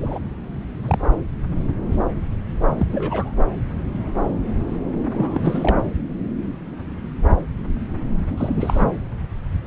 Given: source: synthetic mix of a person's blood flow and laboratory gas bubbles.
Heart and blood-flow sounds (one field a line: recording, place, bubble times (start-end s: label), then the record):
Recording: Doppler ultrasound of blood flow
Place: subclavian vein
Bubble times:
0.00-0.18 s: bubbles
0.81-0.98 s: bubbles
2.78-2.87 s: bubbles
2.89-3.33 s: bubbles
5.14-5.79 s: bubbles
8.38-8.85 s: bubbles
From the record:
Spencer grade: 2 (many but less than half of the cardiac periods contain bubble signals, singularly or in groups)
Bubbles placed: anywhere in the cardiac cycle